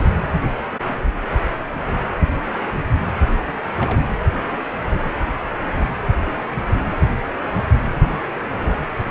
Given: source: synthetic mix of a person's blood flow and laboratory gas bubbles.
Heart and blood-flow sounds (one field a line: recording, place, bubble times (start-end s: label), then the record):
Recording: Doppler ultrasound of blood flow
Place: precordium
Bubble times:
0.00-0.09 s: bubbles
3.39-3.53 s: bubbles
3.78-3.98 s: bubbles
From the record:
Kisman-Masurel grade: 221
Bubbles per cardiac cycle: several, 3 to 8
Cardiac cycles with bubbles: 10 to 50%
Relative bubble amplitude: barely perceptible (0.100 to 0.250)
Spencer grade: 2 (many but less than half of the cardiac periods contain bubble signals, singularly or in groups)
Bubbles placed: anywhere in the cardiac cycle